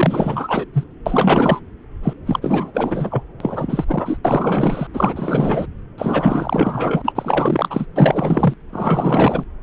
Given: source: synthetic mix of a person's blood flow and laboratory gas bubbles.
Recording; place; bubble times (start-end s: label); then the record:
Doppler ultrasound of blood flow; subclavian vein
0.00-0.65 s: bubbles
0.73-0.84 s: bubbles
1.05-1.60 s: bubbles
2.03-2.14 s: bubbles
2.26-2.71 s: bubbles
2.74-3.23 s: bubbles
3.40-3.85 s: bubbles
3.88-4.17 s: bubbles
4.25-4.87 s: bubbles
4.94-5.66 s: bubbles
5.98-7.86 s: bubbles
7.96-8.54 s: bubbles
8.72-9.44 s: bubbles
9.61-9.63 s: bubbles
From the record:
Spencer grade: 4 (maximum detectable bubble signal sounding continuously throughout systole and diastole of every cardiac period, and overriding the amplitude of the normal cardiac signals); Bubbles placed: anywhere in the cardiac cycle